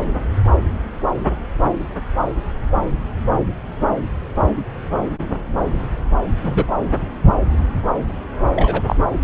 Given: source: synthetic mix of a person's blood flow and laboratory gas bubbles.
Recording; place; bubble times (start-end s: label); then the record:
Doppler ultrasound of blood flow; subclavian vein
6.43-6.67 s: bubbles
8.55-8.83 s: bubbles
8.87-8.96 s: bubbles
From the record:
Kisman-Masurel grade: 123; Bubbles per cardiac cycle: 1 to 2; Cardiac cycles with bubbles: 10 to 50%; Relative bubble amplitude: loud (0.450 to 0.775); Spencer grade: 2 (many but less than half of the cardiac periods contain bubble signals, singularly or in groups); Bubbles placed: anywhere in the cardiac cycle